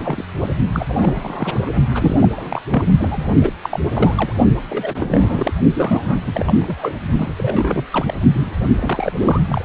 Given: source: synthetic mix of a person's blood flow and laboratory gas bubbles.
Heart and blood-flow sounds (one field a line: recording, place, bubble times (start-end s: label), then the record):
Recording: Doppler ultrasound of blood flow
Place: precordium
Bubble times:
0.00-0.24 s: bubbles
0.40-0.49 s: bubbles
0.73-1.75 s: bubbles
1.94-2.28 s: bubbles
2.36-2.62 s: bubbles
2.70-2.83 s: bubbles
2.97-3.25 s: bubbles
3.41-3.53 s: bubbles
3.63-3.79 s: bubbles
3.92-4.33 s: bubbles
4.70-5.54 s: bubbles
5.75-6.95 s: bubbles
7.18-7.33 s: bubbles
7.37-7.85 s: bubbles
7.93-8.17 s: bubbles
8.32-8.50 s: bubbles
8.79-9.41 s: bubbles
9.49-9.65 s: bubbles
From the record:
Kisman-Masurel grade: 342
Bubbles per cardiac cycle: rolling drumbeat, 9 or more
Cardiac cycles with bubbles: 100%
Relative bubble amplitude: moderate (0.250 to 0.450)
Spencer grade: 3 (all of the cardiac periods contain showers or single bubble signals, but not dominating or overriding the cardiac motion signals)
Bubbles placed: only in the low amplitude regions of the cardiac cycle